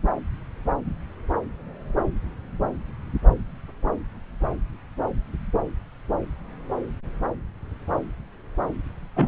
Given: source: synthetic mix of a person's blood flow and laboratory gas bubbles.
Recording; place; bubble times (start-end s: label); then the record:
Doppler ultrasound of blood flow; subclavian vein
9.16-9.28 s: bubbles
From the record:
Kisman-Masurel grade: 113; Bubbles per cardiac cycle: 1 to 2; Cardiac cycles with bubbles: 1 to 10%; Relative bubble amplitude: loud (0.450 to 0.775); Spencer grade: 1 (occasional bubble signal discernible with the cardiac motion signal, with majority of cardiac periods free of bubbles); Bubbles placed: anywhere in the cardiac cycle